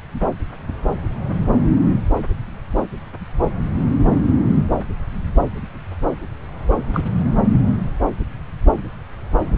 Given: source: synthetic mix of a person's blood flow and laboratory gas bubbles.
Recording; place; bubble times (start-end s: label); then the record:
Doppler ultrasound of blood flow; subclavian vein
6.93-7.01 s: bubbles
From the record:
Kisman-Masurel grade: 112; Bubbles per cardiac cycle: 1 to 2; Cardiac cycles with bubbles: 1 to 10%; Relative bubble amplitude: moderate (0.250 to 0.450); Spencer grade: 1 (occasional bubble signal discernible with the cardiac motion signal, with majority of cardiac periods free of bubbles); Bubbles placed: anywhere in the cardiac cycle